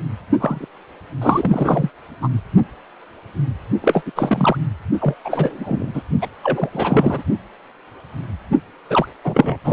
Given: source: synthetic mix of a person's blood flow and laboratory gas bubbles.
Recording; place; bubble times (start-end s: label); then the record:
Doppler ultrasound of blood flow; precordium
0.39-0.66 s: bubbles
1.22-1.90 s: bubbles
2.21-2.29 s: bubbles
3.81-4.04 s: bubbles
4.06-4.12 s: bubbles
4.16-4.56 s: bubbles
5.01-5.14 s: bubbles
5.25-6.03 s: bubbles
6.21-6.28 s: bubbles
6.43-7.22 s: bubbles
8.90-9.07 s: bubbles
9.24-9.58 s: bubbles
9.64-9.73 s: bubbles
From the record:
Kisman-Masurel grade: 333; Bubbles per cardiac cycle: rolling drumbeat, 9 or more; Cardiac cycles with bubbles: 50 to 99%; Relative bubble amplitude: loud (0.450 to 0.775); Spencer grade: 3 (all of the cardiac periods contain showers or single bubble signals, but not dominating or overriding the cardiac motion signals); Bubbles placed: only in the low amplitude regions of the cardiac cycle